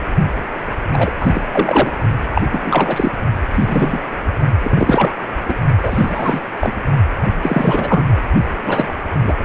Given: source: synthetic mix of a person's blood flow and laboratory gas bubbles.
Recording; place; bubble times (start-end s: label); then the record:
Doppler ultrasound of blood flow; precordium
0.92-1.11 s: bubbles
1.20-1.42 s: bubbles
1.51-1.92 s: bubbles
2.34-2.42 s: bubbles
2.50-3.11 s: bubbles
3.52-4.00 s: bubbles
4.62-5.12 s: bubbles
5.48-5.54 s: bubbles
5.83-6.41 s: bubbles
6.60-6.74 s: bubbles
7.42-8.04 s: bubbles
8.66-8.88 s: bubbles
9.23-9.34 s: bubbles
From the record:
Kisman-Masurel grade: 243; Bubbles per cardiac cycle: several, 3 to 8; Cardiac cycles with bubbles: 100%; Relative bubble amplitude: loud (0.450 to 0.775); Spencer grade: 3 (all of the cardiac periods contain showers or single bubble signals, but not dominating or overriding the cardiac motion signals); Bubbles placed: only in the low amplitude regions of the cardiac cycle